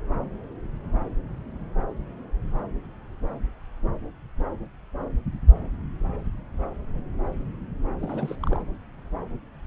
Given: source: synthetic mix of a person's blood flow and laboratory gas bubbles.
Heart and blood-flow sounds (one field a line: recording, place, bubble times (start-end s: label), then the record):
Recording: Doppler ultrasound of blood flow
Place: subclavian vein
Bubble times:
8.00-8.62 s: bubbles
From the record:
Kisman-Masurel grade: 211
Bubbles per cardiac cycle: several, 3 to 8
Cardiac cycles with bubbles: 1 to 10%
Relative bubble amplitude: barely perceptible (0.100 to 0.250)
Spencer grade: 1 (occasional bubble signal discernible with the cardiac motion signal, with majority of cardiac periods free of bubbles)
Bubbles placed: anywhere in the cardiac cycle